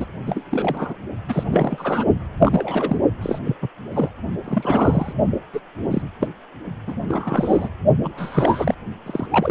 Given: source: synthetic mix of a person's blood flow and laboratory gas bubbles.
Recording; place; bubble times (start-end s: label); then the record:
Doppler ultrasound of blood flow; precordium
0.00-0.06 s: bubbles
0.26-0.44 s: bubbles
0.50-0.95 s: bubbles
1.28-2.04 s: bubbles
2.39-2.97 s: bubbles
3.21-3.39 s: bubbles
3.45-3.56 s: bubbles
3.62-3.69 s: bubbles
3.92-4.09 s: bubbles
4.45-5.12 s: bubbles
5.53-5.60 s: bubbles
5.91-6.02 s: bubbles
6.20-6.28 s: bubbles
6.87-6.95 s: bubbles
7.08-7.69 s: bubbles
8.04-8.74 s: bubbles
9.06-9.27 s: bubbles
9.30-9.50 s: bubbles
From the record:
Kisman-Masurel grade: 242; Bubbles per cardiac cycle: several, 3 to 8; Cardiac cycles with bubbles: 100%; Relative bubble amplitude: moderate (0.250 to 0.450); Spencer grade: 3 (all of the cardiac periods contain showers or single bubble signals, but not dominating or overriding the cardiac motion signals); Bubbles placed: only in the low amplitude regions of the cardiac cycle